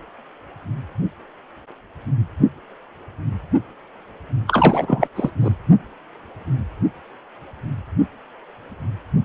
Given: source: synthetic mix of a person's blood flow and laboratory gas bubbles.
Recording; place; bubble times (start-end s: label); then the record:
Doppler ultrasound of blood flow; precordium
4.47-5.07 s: bubbles
5.15-5.30 s: bubbles
5.40-5.51 s: bubbles
From the record:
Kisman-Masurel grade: 213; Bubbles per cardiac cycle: several, 3 to 8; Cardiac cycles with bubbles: 1 to 10%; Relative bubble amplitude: loud (0.450 to 0.775); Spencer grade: 1 (occasional bubble signal discernible with the cardiac motion signal, with majority of cardiac periods free of bubbles); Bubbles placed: only in the low amplitude regions of the cardiac cycle